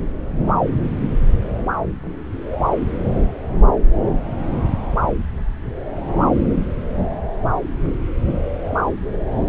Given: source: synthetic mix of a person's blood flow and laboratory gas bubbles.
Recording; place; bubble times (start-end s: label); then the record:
Doppler ultrasound of blood flow; subclavian vein
no bubbles
From the record:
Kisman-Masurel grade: 000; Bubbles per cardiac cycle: 0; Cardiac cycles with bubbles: 0%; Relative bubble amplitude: no bubbles discernible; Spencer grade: 0 (complete lack of bubble signals)